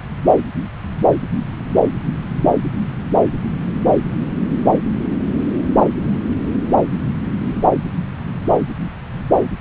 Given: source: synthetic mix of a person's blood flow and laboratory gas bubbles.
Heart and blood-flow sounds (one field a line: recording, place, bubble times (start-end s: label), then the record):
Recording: Doppler ultrasound of blood flow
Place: subclavian vein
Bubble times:
no bubbles
From the record:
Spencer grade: 0 (complete lack of bubble signals)